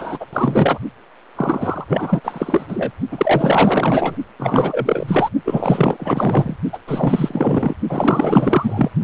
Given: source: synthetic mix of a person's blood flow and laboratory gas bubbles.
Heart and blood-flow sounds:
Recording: Doppler ultrasound of blood flow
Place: precordium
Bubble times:
0.00-0.26 s: bubbles
0.33-0.78 s: bubbles
1.36-1.85 s: bubbles
1.88-2.21 s: bubbles
2.23-2.91 s: bubbles
3.11-4.16 s: bubbles
4.39-5.29 s: bubbles
5.45-6.58 s: bubbles
6.72-6.78 s: bubbles
6.87-7.74 s: bubbles
7.89-8.91 s: bubbles
9.02-9.04 s: bubbles
From the record:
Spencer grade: 4 (maximum detectable bubble signal sounding continuously throughout systole and diastole of every cardiac period, and overriding the amplitude of the normal cardiac signals)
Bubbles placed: only in the low amplitude regions of the cardiac cycle

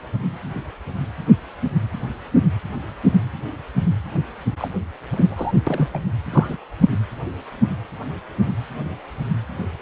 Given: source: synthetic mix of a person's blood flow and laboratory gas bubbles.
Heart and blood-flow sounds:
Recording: Doppler ultrasound of blood flow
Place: precordium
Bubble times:
4.57-4.69 s: bubbles
5.16-5.53 s: bubbles
5.67-5.88 s: bubbles
5.93-5.99 s: bubbles
6.30-6.57 s: bubbles
From the record:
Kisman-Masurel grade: 222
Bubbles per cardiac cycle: several, 3 to 8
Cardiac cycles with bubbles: 10 to 50%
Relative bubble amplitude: moderate (0.250 to 0.450)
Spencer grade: 2 (many but less than half of the cardiac periods contain bubble signals, singularly or in groups)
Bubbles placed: anywhere in the cardiac cycle

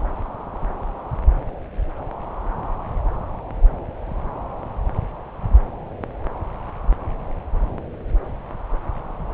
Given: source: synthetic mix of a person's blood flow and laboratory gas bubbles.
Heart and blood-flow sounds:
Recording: Doppler ultrasound of blood flow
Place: subclavian vein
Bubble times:
no bubbles
From the record:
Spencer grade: 0 (complete lack of bubble signals)

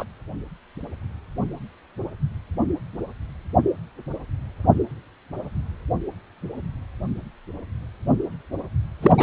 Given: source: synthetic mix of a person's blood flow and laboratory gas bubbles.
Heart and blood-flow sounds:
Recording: Doppler ultrasound of blood flow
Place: precordium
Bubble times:
0.00-0.04 s: bubbles
9.01-9.12 s: bubbles
9.17-9.23 s: bubbles
From the record:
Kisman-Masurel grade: 223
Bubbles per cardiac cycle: several, 3 to 8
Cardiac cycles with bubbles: 10 to 50%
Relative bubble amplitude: loud (0.450 to 0.775)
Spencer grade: 2 (many but less than half of the cardiac periods contain bubble signals, singularly or in groups)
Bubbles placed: anywhere in the cardiac cycle

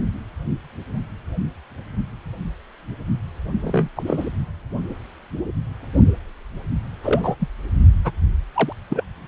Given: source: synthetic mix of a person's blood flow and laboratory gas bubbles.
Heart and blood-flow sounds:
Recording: Doppler ultrasound of blood flow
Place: precordium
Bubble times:
3.61-3.89 s: bubbles
3.96-4.03 s: bubbles
4.06-4.28 s: bubbles
7.01-7.35 s: bubbles
7.39-7.48 s: bubbles
8.05-8.12 s: bubbles
8.54-8.73 s: bubbles
8.90-9.04 s: bubbles
From the record:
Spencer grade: 2 (many but less than half of the cardiac periods contain bubble signals, singularly or in groups)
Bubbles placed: anywhere in the cardiac cycle

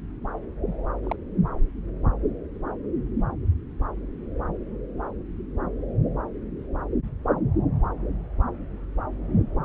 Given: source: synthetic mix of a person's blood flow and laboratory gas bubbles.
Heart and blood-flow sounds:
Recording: Doppler ultrasound of blood flow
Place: subclavian vein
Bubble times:
1.04-1.16 s: bubbles
From the record:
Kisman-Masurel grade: 111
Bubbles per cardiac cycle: 1 to 2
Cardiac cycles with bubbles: 1 to 10%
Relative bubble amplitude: barely perceptible (0.100 to 0.250)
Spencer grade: 1 (occasional bubble signal discernible with the cardiac motion signal, with majority of cardiac periods free of bubbles)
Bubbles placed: anywhere in the cardiac cycle

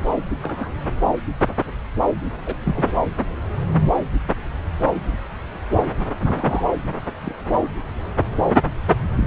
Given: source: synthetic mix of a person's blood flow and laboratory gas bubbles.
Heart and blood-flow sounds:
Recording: Doppler ultrasound of blood flow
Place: subclavian vein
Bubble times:
0.42-0.70 s: bubbles
2.46-2.56 s: bubbles
2.65-2.95 s: bubbles
6.25-6.62 s: bubbles
7.21-7.34 s: bubbles
9.21-9.27 s: bubbles
From the record:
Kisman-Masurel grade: 122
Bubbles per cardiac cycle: 1 to 2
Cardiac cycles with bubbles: 10 to 50%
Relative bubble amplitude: moderate (0.250 to 0.450)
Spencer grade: 2 (many but less than half of the cardiac periods contain bubble signals, singularly or in groups)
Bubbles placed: anywhere in the cardiac cycle

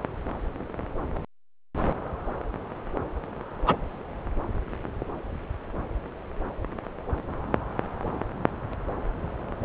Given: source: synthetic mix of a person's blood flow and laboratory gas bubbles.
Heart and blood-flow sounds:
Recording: Doppler ultrasound of blood flow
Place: subclavian vein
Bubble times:
3.67-3.77 s: bubbles
From the record:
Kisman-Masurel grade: 123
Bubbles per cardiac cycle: 1 to 2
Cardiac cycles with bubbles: 10 to 50%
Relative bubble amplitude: loud (0.450 to 0.775)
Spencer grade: 2 (many but less than half of the cardiac periods contain bubble signals, singularly or in groups)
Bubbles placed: anywhere in the cardiac cycle

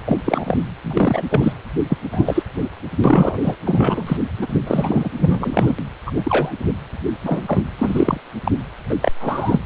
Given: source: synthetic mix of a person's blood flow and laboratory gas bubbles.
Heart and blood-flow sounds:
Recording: Doppler ultrasound of blood flow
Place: precordium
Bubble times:
0.06-0.17 s: bubbles
0.25-0.58 s: bubbles
0.82-1.23 s: bubbles
1.29-1.53 s: bubbles
1.89-1.98 s: bubbles
2.12-2.43 s: bubbles
3.04-3.37 s: bubbles
3.42-3.55 s: bubbles
3.65-4.17 s: bubbles
4.41-4.47 s: bubbles
4.67-5.10 s: bubbles
5.17-5.72 s: bubbles
6.06-6.11 s: bubbles
6.16-6.53 s: bubbles
7.22-7.42 s: bubbles
7.47-7.65 s: bubbles
7.78-8.20 s: bubbles
8.44-8.51 s: bubbles
8.88-8.94 s: bubbles
9.00-9.11 s: bubbles
9.20-9.60 s: bubbles
From the record:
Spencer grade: 3 (all of the cardiac periods contain showers or single bubble signals, but not dominating or overriding the cardiac motion signals)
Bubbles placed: anywhere in the cardiac cycle

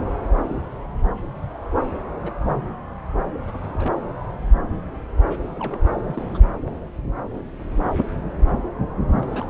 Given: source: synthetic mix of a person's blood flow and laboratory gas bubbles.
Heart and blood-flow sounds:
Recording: Doppler ultrasound of blood flow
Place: subclavian vein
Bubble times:
2.13-2.33 s: bubbles
2.36-2.71 s: bubbles
3.46-4.01 s: bubbles
5.29-5.37 s: bubbles
5.48-5.78 s: bubbles
6.00-6.22 s: bubbles
6.28-6.42 s: bubbles
9.08-9.50 s: bubbles
From the record:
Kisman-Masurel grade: 221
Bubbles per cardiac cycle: several, 3 to 8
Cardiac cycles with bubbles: 10 to 50%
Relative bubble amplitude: barely perceptible (0.100 to 0.250)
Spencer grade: 2 (many but less than half of the cardiac periods contain bubble signals, singularly or in groups)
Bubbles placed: anywhere in the cardiac cycle

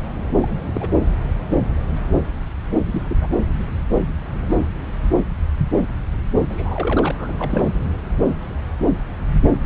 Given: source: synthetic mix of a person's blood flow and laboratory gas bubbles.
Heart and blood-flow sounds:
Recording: Doppler ultrasound of blood flow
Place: subclavian vein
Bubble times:
0.42-0.60 s: bubbles
0.67-0.88 s: bubbles
2.92-3.02 s: bubbles
3.08-3.17 s: bubbles
3.21-3.28 s: bubbles
6.46-7.12 s: bubbles
7.14-7.33 s: bubbles
7.38-7.68 s: bubbles
From the record:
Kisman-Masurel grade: 221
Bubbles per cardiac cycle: several, 3 to 8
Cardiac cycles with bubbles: 10 to 50%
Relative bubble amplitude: barely perceptible (0.100 to 0.250)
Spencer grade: 2 (many but less than half of the cardiac periods contain bubble signals, singularly or in groups)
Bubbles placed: anywhere in the cardiac cycle

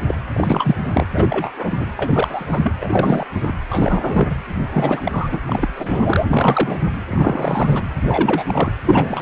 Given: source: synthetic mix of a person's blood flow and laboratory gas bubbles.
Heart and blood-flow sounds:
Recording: Doppler ultrasound of blood flow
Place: precordium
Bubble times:
0.07-0.14 s: bubbles
0.33-0.76 s: bubbles
0.93-1.06 s: bubbles
1.14-1.53 s: bubbles
1.56-1.87 s: bubbles
1.97-2.73 s: bubbles
2.80-3.27 s: bubbles
3.33-3.57 s: bubbles
3.69-4.36 s: bubbles
4.72-5.00 s: bubbles
5.04-5.29 s: bubbles
5.32-5.40 s: bubbles
5.46-6.22 s: bubbles
6.30-6.79 s: bubbles
7.10-7.83 s: bubbles
8.06-8.75 s: bubbles
8.82-9.22 s: bubbles
From the record:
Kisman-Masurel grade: 343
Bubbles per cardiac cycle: rolling drumbeat, 9 or more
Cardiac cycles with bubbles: 100%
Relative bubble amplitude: loud (0.450 to 0.775)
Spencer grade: 3 (all of the cardiac periods contain showers or single bubble signals, but not dominating or overriding the cardiac motion signals)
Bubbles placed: anywhere in the cardiac cycle

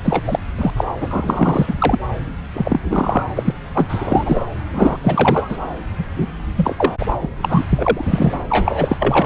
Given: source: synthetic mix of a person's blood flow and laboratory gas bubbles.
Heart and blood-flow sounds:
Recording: Doppler ultrasound of blood flow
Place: subclavian vein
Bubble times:
0.04-0.23 s: bubbles
0.27-0.39 s: bubbles
0.57-0.73 s: bubbles
0.77-0.84 s: bubbles
1.00-1.75 s: bubbles
1.78-1.99 s: bubbles
2.54-2.80 s: bubbles
2.89-3.24 s: bubbles
3.35-3.54 s: bubbles
3.75-4.45 s: bubbles
4.72-4.97 s: bubbles
5.04-5.58 s: bubbles
5.97-6.04 s: bubbles
6.16-6.28 s: bubbles
6.56-6.93 s: bubbles
6.99-7.06 s: bubbles
7.20-7.29 s: bubbles
7.43-7.65 s: bubbles
7.70-8.35 s: bubbles
8.48-9.26 s: bubbles
From the record:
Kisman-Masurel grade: 343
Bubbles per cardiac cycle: rolling drumbeat, 9 or more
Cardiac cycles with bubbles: 100%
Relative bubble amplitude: loud (0.450 to 0.775)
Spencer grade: 3 (all of the cardiac periods contain showers or single bubble signals, but not dominating or overriding the cardiac motion signals)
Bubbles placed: anywhere in the cardiac cycle

